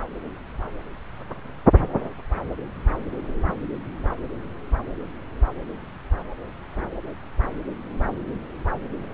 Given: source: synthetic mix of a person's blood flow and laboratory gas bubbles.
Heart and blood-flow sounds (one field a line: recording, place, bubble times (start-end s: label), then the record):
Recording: Doppler ultrasound of blood flow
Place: subclavian vein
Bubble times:
3.48-3.52 s: bubbles
From the record:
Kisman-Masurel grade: 111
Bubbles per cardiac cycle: 1 to 2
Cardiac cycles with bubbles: 1 to 10%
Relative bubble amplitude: barely perceptible (0.100 to 0.250)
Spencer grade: 1 (occasional bubble signal discernible with the cardiac motion signal, with majority of cardiac periods free of bubbles)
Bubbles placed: anywhere in the cardiac cycle